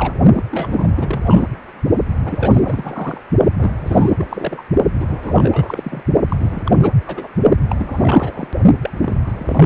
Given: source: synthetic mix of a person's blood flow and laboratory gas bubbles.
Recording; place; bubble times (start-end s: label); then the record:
Doppler ultrasound of blood flow; precordium
0.00-0.14 s: bubbles
0.36-0.43 s: bubbles
0.51-0.88 s: bubbles
0.96-1.47 s: bubbles
2.25-3.21 s: bubbles
3.58-3.71 s: bubbles
3.79-4.10 s: bubbles
4.18-4.26 s: bubbles
4.29-4.62 s: bubbles
5.00-6.03 s: bubbles
6.29-6.62 s: bubbles
6.65-6.71 s: bubbles
6.79-6.92 s: bubbles
7.05-7.28 s: bubbles
7.70-8.48 s: bubbles
8.83-8.91 s: bubbles
9.02-9.17 s: bubbles
9.26-9.33 s: bubbles
9.39-9.66 s: bubbles
From the record:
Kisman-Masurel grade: 342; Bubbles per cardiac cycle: rolling drumbeat, 9 or more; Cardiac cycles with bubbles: 100%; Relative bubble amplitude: moderate (0.250 to 0.450); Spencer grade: 3 (all of the cardiac periods contain showers or single bubble signals, but not dominating or overriding the cardiac motion signals); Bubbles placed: only in the low amplitude regions of the cardiac cycle